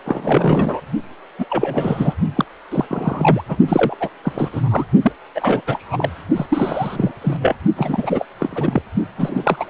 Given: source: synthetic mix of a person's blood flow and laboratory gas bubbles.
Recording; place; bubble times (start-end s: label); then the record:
Doppler ultrasound of blood flow; precordium
0.05-0.80 s: bubbles
1.39-1.47 s: bubbles
1.50-2.15 s: bubbles
2.35-2.45 s: bubbles
2.71-2.85 s: bubbles
2.89-3.42 s: bubbles
3.48-3.57 s: bubbles
3.68-3.96 s: bubbles
4.00-4.09 s: bubbles
4.23-4.49 s: bubbles
4.52-4.87 s: bubbles
5.02-5.12 s: bubbles
5.34-5.62 s: bubbles
5.67-6.10 s: bubbles
6.36-6.46 s: bubbles
6.50-7.12 s: bubbles
7.21-7.37 s: bubbles
7.41-7.55 s: bubbles
7.76-8.26 s: bubbles
8.39-8.82 s: bubbles
9.18-9.65 s: bubbles
From the record:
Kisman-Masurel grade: 343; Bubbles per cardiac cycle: rolling drumbeat, 9 or more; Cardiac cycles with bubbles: 100%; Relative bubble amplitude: loud (0.450 to 0.775); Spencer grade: 3 (all of the cardiac periods contain showers or single bubble signals, but not dominating or overriding the cardiac motion signals); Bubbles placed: only in the low amplitude regions of the cardiac cycle